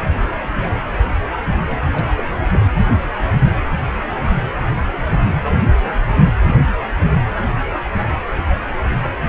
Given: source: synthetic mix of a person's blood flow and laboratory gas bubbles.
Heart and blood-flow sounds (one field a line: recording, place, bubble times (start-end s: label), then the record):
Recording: Doppler ultrasound of blood flow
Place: precordium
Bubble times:
1.93-2.24 s: bubbles
2.52-2.59 s: bubbles
From the record:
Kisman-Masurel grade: 212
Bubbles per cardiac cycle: several, 3 to 8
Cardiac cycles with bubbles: 1 to 10%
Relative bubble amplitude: moderate (0.250 to 0.450)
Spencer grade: 1 (occasional bubble signal discernible with the cardiac motion signal, with majority of cardiac periods free of bubbles)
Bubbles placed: anywhere in the cardiac cycle